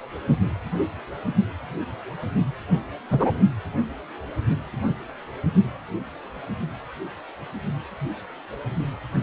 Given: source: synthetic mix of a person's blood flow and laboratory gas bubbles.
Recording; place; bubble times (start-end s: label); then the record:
Doppler ultrasound of blood flow; precordium
3.10-3.31 s: bubbles
From the record:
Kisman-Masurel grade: 122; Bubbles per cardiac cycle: 1 to 2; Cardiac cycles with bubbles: 10 to 50%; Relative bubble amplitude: moderate (0.250 to 0.450); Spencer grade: 2 (many but less than half of the cardiac periods contain bubble signals, singularly or in groups); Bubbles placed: only in the low amplitude regions of the cardiac cycle